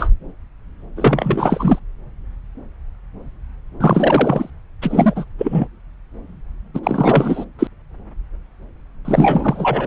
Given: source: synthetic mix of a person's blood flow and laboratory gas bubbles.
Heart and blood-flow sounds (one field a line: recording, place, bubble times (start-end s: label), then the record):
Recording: Doppler ultrasound of blood flow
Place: subclavian vein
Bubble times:
0.00-0.10 s: bubbles
0.96-1.79 s: bubbles
3.80-4.50 s: bubbles
4.81-5.25 s: bubbles
5.38-5.67 s: bubbles
6.74-6.79 s: bubbles
6.83-7.45 s: bubbles
7.58-7.67 s: bubbles
9.05-9.87 s: bubbles
From the record:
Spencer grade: 3 (all of the cardiac periods contain showers or single bubble signals, but not dominating or overriding the cardiac motion signals)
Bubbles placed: anywhere in the cardiac cycle